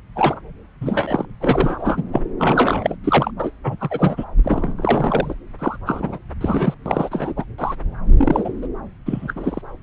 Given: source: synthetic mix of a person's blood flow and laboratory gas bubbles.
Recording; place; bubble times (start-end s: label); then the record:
Doppler ultrasound of blood flow; subclavian vein
0.15-0.41 s: bubbles
0.81-1.25 s: bubbles
1.40-2.04 s: bubbles
2.12-2.21 s: bubbles
2.39-2.96 s: bubbles
3.04-3.31 s: bubbles
3.40-3.50 s: bubbles
3.63-3.75 s: bubbles
3.80-4.25 s: bubbles
4.43-4.74 s: bubbles
4.77-5.34 s: bubbles
5.58-5.77 s: bubbles
5.85-6.18 s: bubbles
6.41-6.75 s: bubbles
6.85-7.33 s: bubbles
7.36-7.44 s: bubbles
7.58-7.75 s: bubbles
8.17-8.53 s: bubbles
8.62-8.68 s: bubbles
9.06-9.33 s: bubbles
9.36-9.62 s: bubbles
From the record:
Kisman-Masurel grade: 342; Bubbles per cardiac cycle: rolling drumbeat, 9 or more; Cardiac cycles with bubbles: 100%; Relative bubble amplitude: moderate (0.250 to 0.450); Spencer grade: 3 (all of the cardiac periods contain showers or single bubble signals, but not dominating or overriding the cardiac motion signals); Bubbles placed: anywhere in the cardiac cycle